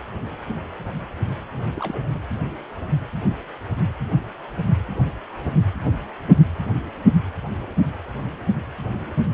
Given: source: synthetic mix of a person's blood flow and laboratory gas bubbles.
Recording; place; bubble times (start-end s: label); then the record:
Doppler ultrasound of blood flow; precordium
1.75-2.08 s: bubbles
2.12-2.20 s: bubbles
From the record:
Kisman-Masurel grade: 211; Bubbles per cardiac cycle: several, 3 to 8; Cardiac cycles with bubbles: 1 to 10%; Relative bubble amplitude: barely perceptible (0.100 to 0.250); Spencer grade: 1 (occasional bubble signal discernible with the cardiac motion signal, with majority of cardiac periods free of bubbles); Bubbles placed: anywhere in the cardiac cycle